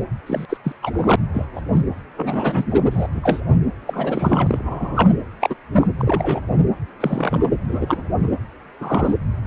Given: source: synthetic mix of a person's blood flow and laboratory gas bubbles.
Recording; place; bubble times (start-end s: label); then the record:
Doppler ultrasound of blood flow; precordium
0.27-0.46 s: bubbles
0.49-0.57 s: bubbles
0.64-0.72 s: bubbles
0.82-1.16 s: bubbles
1.33-1.46 s: bubbles
1.55-1.61 s: bubbles
1.72-1.80 s: bubbles
2.16-2.67 s: bubbles
2.71-2.82 s: bubbles
2.91-3.07 s: bubbles
3.13-3.21 s: bubbles
3.23-3.41 s: bubbles
3.87-5.10 s: bubbles
5.40-5.55 s: bubbles
5.73-5.87 s: bubbles
5.98-6.41 s: bubbles
7.00-7.49 s: bubbles
7.68-8.05 s: bubbles
8.22-8.28 s: bubbles
8.80-9.14 s: bubbles
From the record:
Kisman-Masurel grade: 243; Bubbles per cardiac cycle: several, 3 to 8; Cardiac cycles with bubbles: 100%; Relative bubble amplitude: loud (0.450 to 0.775); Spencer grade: 3 (all of the cardiac periods contain showers or single bubble signals, but not dominating or overriding the cardiac motion signals); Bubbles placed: anywhere in the cardiac cycle